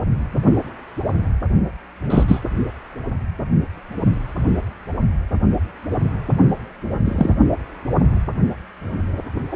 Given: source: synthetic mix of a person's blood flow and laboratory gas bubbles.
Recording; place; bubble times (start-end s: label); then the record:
Doppler ultrasound of blood flow; precordium
2.10-2.23 s: bubbles
2.27-2.40 s: bubbles
7.05-7.35 s: bubbles
9.51-9.56 s: bubbles
From the record:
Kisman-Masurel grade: 123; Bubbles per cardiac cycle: 1 to 2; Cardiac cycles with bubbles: 10 to 50%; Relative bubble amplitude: loud (0.450 to 0.775); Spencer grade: 2 (many but less than half of the cardiac periods contain bubble signals, singularly or in groups); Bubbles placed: only in the low amplitude regions of the cardiac cycle